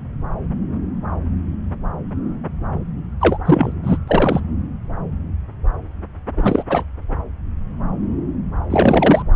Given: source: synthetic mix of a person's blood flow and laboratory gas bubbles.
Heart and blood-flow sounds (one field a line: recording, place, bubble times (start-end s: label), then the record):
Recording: Doppler ultrasound of blood flow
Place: subclavian vein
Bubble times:
3.20-3.38 s: bubbles
3.45-3.72 s: bubbles
3.82-3.98 s: bubbles
4.07-4.40 s: bubbles
6.35-6.64 s: bubbles
6.69-6.83 s: bubbles
8.70-9.22 s: bubbles
From the record:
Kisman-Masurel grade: 223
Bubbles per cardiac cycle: several, 3 to 8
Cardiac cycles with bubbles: 10 to 50%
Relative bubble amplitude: loud (0.450 to 0.775)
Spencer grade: 2 (many but less than half of the cardiac periods contain bubble signals, singularly or in groups)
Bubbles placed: anywhere in the cardiac cycle